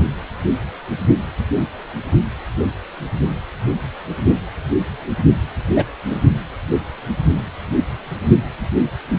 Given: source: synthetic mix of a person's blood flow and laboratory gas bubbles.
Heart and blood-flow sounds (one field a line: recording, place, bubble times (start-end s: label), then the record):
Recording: Doppler ultrasound of blood flow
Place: precordium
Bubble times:
5.76-5.85 s: bubbles
6.10-6.19 s: bubbles
From the record:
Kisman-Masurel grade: 123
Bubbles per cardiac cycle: 1 to 2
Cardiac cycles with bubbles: 10 to 50%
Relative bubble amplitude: loud (0.450 to 0.775)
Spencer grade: 2 (many but less than half of the cardiac periods contain bubble signals, singularly or in groups)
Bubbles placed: anywhere in the cardiac cycle